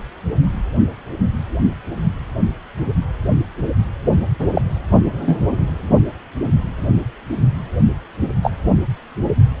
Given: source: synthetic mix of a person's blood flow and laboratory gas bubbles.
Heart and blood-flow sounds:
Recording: Doppler ultrasound of blood flow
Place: precordium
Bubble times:
4.39-4.47 s: bubbles
4.54-4.62 s: bubbles
5.21-5.37 s: bubbles
8.42-8.51 s: bubbles
From the record:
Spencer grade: 2 (many but less than half of the cardiac periods contain bubble signals, singularly or in groups)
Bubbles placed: only in the low amplitude regions of the cardiac cycle

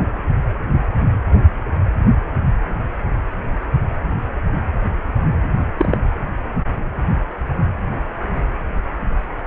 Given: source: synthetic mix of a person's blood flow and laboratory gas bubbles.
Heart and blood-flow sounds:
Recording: Doppler ultrasound of blood flow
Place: precordium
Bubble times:
5.77-5.98 s: bubbles
From the record:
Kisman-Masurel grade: 123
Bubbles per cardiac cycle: 1 to 2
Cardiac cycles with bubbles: 10 to 50%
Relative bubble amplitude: loud (0.450 to 0.775)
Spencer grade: 2 (many but less than half of the cardiac periods contain bubble signals, singularly or in groups)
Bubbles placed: only in the low amplitude regions of the cardiac cycle

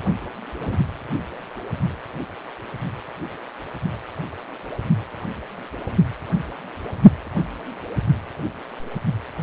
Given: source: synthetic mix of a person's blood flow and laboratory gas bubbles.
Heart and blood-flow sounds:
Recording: Doppler ultrasound of blood flow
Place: precordium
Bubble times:
0.58-0.78 s: bubbles
From the record:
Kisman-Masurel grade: 121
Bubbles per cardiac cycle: 1 to 2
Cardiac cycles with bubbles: 10 to 50%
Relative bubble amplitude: barely perceptible (0.100 to 0.250)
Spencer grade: 2 (many but less than half of the cardiac periods contain bubble signals, singularly or in groups)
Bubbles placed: anywhere in the cardiac cycle

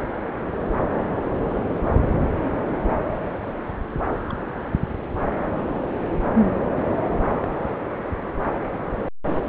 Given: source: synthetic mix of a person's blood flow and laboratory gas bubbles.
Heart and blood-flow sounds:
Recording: Doppler ultrasound of blood flow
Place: subclavian vein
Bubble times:
3.42-3.52 s: bubbles
4.29-4.35 s: bubbles
From the record:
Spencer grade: 1 (occasional bubble signal discernible with the cardiac motion signal, with majority of cardiac periods free of bubbles)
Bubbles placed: anywhere in the cardiac cycle

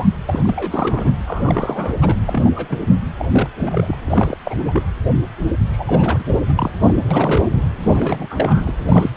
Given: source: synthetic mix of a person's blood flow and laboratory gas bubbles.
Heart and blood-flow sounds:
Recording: Doppler ultrasound of blood flow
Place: precordium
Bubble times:
0.00-0.08 s: bubbles
0.26-1.11 s: bubbles
1.27-1.97 s: bubbles
2.01-2.19 s: bubbles
2.26-2.52 s: bubbles
2.55-2.95 s: bubbles
3.19-3.27 s: bubbles
3.32-3.50 s: bubbles
3.57-3.97 s: bubbles
4.04-4.38 s: bubbles
4.45-4.83 s: bubbles
5.72-6.41 s: bubbles
6.48-6.71 s: bubbles
6.83-6.96 s: bubbles
7.11-7.50 s: bubbles
7.80-8.82 s: bubbles
8.86-9.10 s: bubbles
9.14-9.17 s: bubbles
From the record:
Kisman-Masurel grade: 342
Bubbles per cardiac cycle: rolling drumbeat, 9 or more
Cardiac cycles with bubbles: 100%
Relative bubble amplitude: moderate (0.250 to 0.450)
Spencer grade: 3 (all of the cardiac periods contain showers or single bubble signals, but not dominating or overriding the cardiac motion signals)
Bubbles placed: anywhere in the cardiac cycle

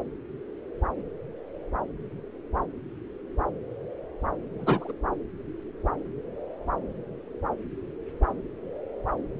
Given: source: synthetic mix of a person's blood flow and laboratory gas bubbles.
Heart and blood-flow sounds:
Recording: Doppler ultrasound of blood flow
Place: subclavian vein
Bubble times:
4.58-4.92 s: bubbles
From the record:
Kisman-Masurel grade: 211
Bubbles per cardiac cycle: several, 3 to 8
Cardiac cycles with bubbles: 1 to 10%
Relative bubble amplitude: barely perceptible (0.100 to 0.250)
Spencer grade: 1 (occasional bubble signal discernible with the cardiac motion signal, with majority of cardiac periods free of bubbles)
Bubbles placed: anywhere in the cardiac cycle

